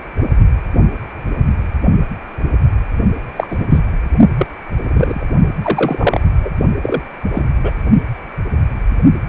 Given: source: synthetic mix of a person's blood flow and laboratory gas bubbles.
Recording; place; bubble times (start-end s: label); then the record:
Doppler ultrasound of blood flow; precordium
3.36-3.65 s: bubbles
3.69-3.79 s: bubbles
4.38-4.47 s: bubbles
4.88-5.25 s: bubbles
5.62-6.21 s: bubbles
6.42-6.50 s: bubbles
6.81-7.02 s: bubbles
7.33-7.45 s: bubbles
7.62-7.71 s: bubbles
From the record:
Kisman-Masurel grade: 223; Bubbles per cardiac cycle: several, 3 to 8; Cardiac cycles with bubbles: 10 to 50%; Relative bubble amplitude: loud (0.450 to 0.775); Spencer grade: 2 (many but less than half of the cardiac periods contain bubble signals, singularly or in groups); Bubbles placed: only in the low amplitude regions of the cardiac cycle